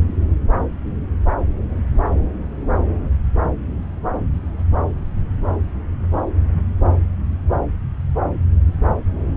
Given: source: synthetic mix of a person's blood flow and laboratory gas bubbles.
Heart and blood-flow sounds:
Doppler ultrasound of blood flow; subclavian vein
4.58-4.64 s: bubbles
From the record:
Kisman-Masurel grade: 121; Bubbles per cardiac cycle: 1 to 2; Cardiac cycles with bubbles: 10 to 50%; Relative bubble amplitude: barely perceptible (0.100 to 0.250); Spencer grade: 2 (many but less than half of the cardiac periods contain bubble signals, singularly or in groups); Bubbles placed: anywhere in the cardiac cycle

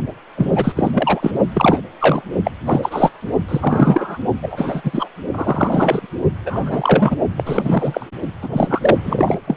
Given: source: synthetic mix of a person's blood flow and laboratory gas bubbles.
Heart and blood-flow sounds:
Doppler ultrasound of blood flow; precordium
0.37-0.52 s: bubbles
0.55-0.72 s: bubbles
0.76-0.91 s: bubbles
0.94-1.31 s: bubbles
1.53-1.80 s: bubbles
1.99-2.22 s: bubbles
2.44-2.51 s: bubbles
2.65-3.10 s: bubbles
3.48-4.17 s: bubbles
4.42-4.82 s: bubbles
4.84-5.08 s: bubbles
5.33-6.06 s: bubbles
6.46-7.15 s: bubbles
7.37-8.06 s: bubbles
8.42-8.97 s: bubbles
9.04-9.36 s: bubbles
9.47-9.56 s: bubbles
From the record:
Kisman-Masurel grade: 343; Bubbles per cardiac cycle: rolling drumbeat, 9 or more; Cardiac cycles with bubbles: 100%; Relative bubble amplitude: loud (0.450 to 0.775); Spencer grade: 3 (all of the cardiac periods contain showers or single bubble signals, but not dominating or overriding the cardiac motion signals); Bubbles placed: only in the low amplitude regions of the cardiac cycle

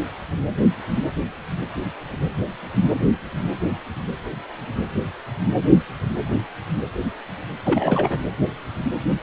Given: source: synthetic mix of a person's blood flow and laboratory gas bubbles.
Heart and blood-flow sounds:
Doppler ultrasound of blood flow; precordium
7.64-8.19 s: bubbles
From the record:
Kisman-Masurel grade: 212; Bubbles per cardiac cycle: several, 3 to 8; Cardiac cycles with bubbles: 1 to 10%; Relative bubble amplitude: moderate (0.250 to 0.450); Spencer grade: 1 (occasional bubble signal discernible with the cardiac motion signal, with majority of cardiac periods free of bubbles); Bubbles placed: anywhere in the cardiac cycle

